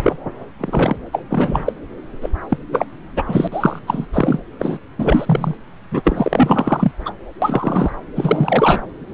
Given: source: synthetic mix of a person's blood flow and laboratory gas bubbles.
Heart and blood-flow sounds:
Doppler ultrasound of blood flow; subclavian vein
0.00-0.16 s: bubbles
0.60-0.96 s: bubbles
1.12-1.24 s: bubbles
1.30-1.72 s: bubbles
2.21-2.29 s: bubbles
2.49-2.57 s: bubbles
2.71-2.85 s: bubbles
3.16-3.22 s: bubbles
3.28-3.48 s: bubbles
3.52-3.79 s: bubbles
3.86-4.06 s: bubbles
4.13-4.40 s: bubbles
4.59-4.79 s: bubbles
4.99-5.55 s: bubbles
5.91-6.92 s: bubbles
7.06-7.12 s: bubbles
7.42-7.92 s: bubbles
8.16-8.81 s: bubbles
From the record:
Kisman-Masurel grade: 343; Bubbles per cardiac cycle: rolling drumbeat, 9 or more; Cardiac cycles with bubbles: 100%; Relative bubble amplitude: loud (0.450 to 0.775); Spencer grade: 3 (all of the cardiac periods contain showers or single bubble signals, but not dominating or overriding the cardiac motion signals); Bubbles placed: anywhere in the cardiac cycle

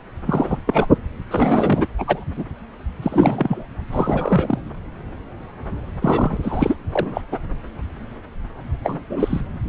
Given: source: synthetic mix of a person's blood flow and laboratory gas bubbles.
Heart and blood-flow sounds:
Doppler ultrasound of blood flow; subclavian vein
0.26-0.58 s: bubbles
0.66-0.88 s: bubbles
1.30-1.87 s: bubbles
1.98-2.24 s: bubbles
2.35-2.44 s: bubbles
3.02-3.65 s: bubbles
3.92-4.61 s: bubbles
6.01-6.38 s: bubbles
6.42-6.75 s: bubbles
6.92-7.21 s: bubbles
7.31-7.38 s: bubbles
8.84-9.01 s: bubbles
9.10-9.41 s: bubbles
From the record:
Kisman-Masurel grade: 233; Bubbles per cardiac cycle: several, 3 to 8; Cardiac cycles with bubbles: 50 to 99%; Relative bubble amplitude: loud (0.450 to 0.775); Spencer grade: 3 (all of the cardiac periods contain showers or single bubble signals, but not dominating or overriding the cardiac motion signals); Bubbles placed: anywhere in the cardiac cycle

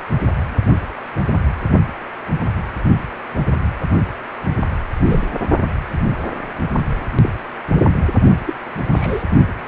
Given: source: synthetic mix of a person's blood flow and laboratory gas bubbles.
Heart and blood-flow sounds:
Doppler ultrasound of blood flow; precordium
5.05-5.24 s: bubbles
7.22-7.29 s: bubbles
7.75-7.80 s: bubbles
8.46-8.54 s: bubbles
8.94-9.24 s: bubbles
From the record:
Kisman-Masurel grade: 122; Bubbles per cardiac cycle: 1 to 2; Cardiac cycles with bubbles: 10 to 50%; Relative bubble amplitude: moderate (0.250 to 0.450); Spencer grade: 2 (many but less than half of the cardiac periods contain bubble signals, singularly or in groups); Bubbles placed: only in the low amplitude regions of the cardiac cycle

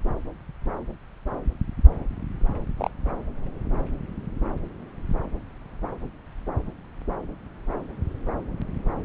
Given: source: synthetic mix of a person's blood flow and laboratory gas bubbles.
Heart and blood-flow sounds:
Doppler ultrasound of blood flow; subclavian vein
2.78-2.90 s: bubbles
From the record:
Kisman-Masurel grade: 111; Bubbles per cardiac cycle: 1 to 2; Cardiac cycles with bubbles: 1 to 10%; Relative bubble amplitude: barely perceptible (0.100 to 0.250); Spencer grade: 1 (occasional bubble signal discernible with the cardiac motion signal, with majority of cardiac periods free of bubbles); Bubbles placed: anywhere in the cardiac cycle

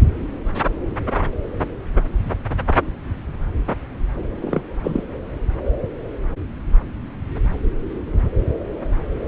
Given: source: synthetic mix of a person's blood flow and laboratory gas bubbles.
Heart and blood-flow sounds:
Doppler ultrasound of blood flow; subclavian vein
4.42-4.61 s: bubbles
4.83-5.04 s: bubbles
From the record:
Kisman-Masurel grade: 212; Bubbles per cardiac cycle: several, 3 to 8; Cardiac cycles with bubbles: 1 to 10%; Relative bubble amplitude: moderate (0.250 to 0.450); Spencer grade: 1 (occasional bubble signal discernible with the cardiac motion signal, with majority of cardiac periods free of bubbles); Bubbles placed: anywhere in the cardiac cycle

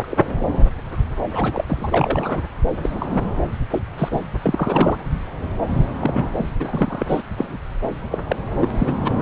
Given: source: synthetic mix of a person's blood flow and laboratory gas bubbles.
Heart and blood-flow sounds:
Doppler ultrasound of blood flow; subclavian vein
0.00-0.08 s: bubbles
0.10-0.25 s: bubbles
1.31-1.65 s: bubbles
1.67-2.40 s: bubbles
2.73-3.21 s: bubbles
3.71-3.81 s: bubbles
3.98-4.09 s: bubbles
4.12-4.21 s: bubbles
4.43-4.97 s: bubbles
6.01-6.23 s: bubbles
6.33-6.46 s: bubbles
6.59-7.06 s: bubbles
7.08-7.22 s: bubbles
7.38-7.57 s: bubbles
8.12-8.18 s: bubbles
8.28-8.36 s: bubbles
8.60-8.71 s: bubbles
8.78-8.94 s: bubbles
9.05-9.12 s: bubbles
From the record:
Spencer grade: 3 (all of the cardiac periods contain showers or single bubble signals, but not dominating or overriding the cardiac motion signals); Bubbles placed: anywhere in the cardiac cycle

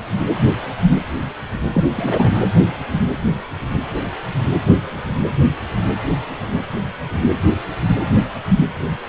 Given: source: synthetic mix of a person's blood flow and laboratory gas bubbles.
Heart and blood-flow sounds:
Doppler ultrasound of blood flow; precordium
1.74-1.84 s: bubbles
1.95-2.39 s: bubbles
From the record:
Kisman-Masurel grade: 212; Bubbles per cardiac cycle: several, 3 to 8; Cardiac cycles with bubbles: 1 to 10%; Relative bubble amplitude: moderate (0.250 to 0.450); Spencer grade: 1 (occasional bubble signal discernible with the cardiac motion signal, with majority of cardiac periods free of bubbles); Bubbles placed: anywhere in the cardiac cycle

